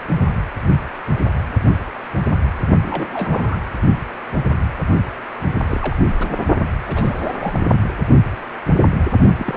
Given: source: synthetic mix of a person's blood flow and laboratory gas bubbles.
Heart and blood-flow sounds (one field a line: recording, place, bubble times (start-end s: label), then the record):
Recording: Doppler ultrasound of blood flow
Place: precordium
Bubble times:
2.82-3.57 s: bubbles
5.59-5.95 s: bubbles
6.20-6.39 s: bubbles
6.86-7.59 s: bubbles
7.67-7.75 s: bubbles
9.38-9.57 s: bubbles
From the record:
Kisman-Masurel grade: 221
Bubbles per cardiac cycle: several, 3 to 8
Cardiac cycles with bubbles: 10 to 50%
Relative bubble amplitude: barely perceptible (0.100 to 0.250)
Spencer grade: 2 (many but less than half of the cardiac periods contain bubble signals, singularly or in groups)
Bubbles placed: only in the low amplitude regions of the cardiac cycle